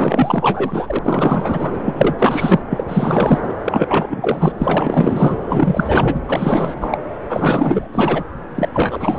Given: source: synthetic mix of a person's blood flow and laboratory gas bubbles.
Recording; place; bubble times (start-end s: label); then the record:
Doppler ultrasound of blood flow; subclavian vein
0.00-0.99 s: bubbles
1.03-1.77 s: bubbles
1.84-2.62 s: bubbles
2.69-2.84 s: bubbles
2.87-3.54 s: bubbles
3.64-4.53 s: bubbles
4.58-5.38 s: bubbles
5.49-6.20 s: bubbles
6.24-6.74 s: bubbles
6.81-6.98 s: bubbles
7.29-7.87 s: bubbles
7.92-8.25 s: bubbles
8.55-8.69 s: bubbles
8.74-9.19 s: bubbles
From the record:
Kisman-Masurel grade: 444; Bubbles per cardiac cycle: continuous sound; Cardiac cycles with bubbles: 100%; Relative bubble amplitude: maximal (0.775 to 0.999); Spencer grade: 4 (maximum detectable bubble signal sounding continuously throughout systole and diastole of every cardiac period, and overriding the amplitude of the normal cardiac signals); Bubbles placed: anywhere in the cardiac cycle